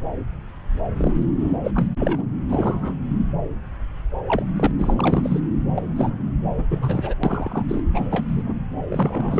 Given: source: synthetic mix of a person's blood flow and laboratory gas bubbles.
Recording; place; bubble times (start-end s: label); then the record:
Doppler ultrasound of blood flow; subclavian vein
0.97-1.27 s: bubbles
1.39-1.59 s: bubbles
1.63-1.71 s: bubbles
1.75-1.87 s: bubbles
1.99-2.24 s: bubbles
2.49-2.96 s: bubbles
4.28-4.44 s: bubbles
4.56-4.72 s: bubbles
4.78-5.41 s: bubbles
5.76-6.19 s: bubbles
6.58-6.63 s: bubbles
6.70-7.15 s: bubbles
7.23-7.65 s: bubbles
7.68-7.83 s: bubbles
7.94-8.25 s: bubbles
8.28-8.54 s: bubbles
8.90-9.39 s: bubbles
From the record:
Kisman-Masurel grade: 232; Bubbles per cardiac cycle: several, 3 to 8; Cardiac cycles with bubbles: 50 to 99%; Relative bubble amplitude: moderate (0.250 to 0.450); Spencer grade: 3 (all of the cardiac periods contain showers or single bubble signals, but not dominating or overriding the cardiac motion signals); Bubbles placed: anywhere in the cardiac cycle